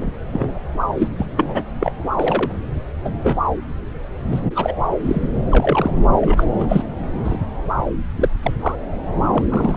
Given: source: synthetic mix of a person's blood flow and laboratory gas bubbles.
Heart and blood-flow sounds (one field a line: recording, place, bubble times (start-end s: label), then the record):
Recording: Doppler ultrasound of blood flow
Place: subclavian vein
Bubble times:
0.00-0.10 s: bubbles
0.33-0.47 s: bubbles
0.97-1.08 s: bubbles
1.17-1.26 s: bubbles
1.35-1.61 s: bubbles
1.80-1.92 s: bubbles
2.14-2.52 s: bubbles
3.04-3.10 s: bubbles
3.23-3.36 s: bubbles
4.31-4.41 s: bubbles
4.55-4.75 s: bubbles
5.04-5.42 s: bubbles
5.50-6.03 s: bubbles
6.21-6.44 s: bubbles
6.58-6.87 s: bubbles
7.24-7.38 s: bubbles
8.15-8.29 s: bubbles
8.42-8.53 s: bubbles
8.60-8.76 s: bubbles
9.31-9.44 s: bubbles
9.49-9.77 s: bubbles
From the record:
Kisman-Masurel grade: 242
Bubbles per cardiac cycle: several, 3 to 8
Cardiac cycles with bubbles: 100%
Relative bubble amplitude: moderate (0.250 to 0.450)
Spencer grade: 3 (all of the cardiac periods contain showers or single bubble signals, but not dominating or overriding the cardiac motion signals)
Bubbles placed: anywhere in the cardiac cycle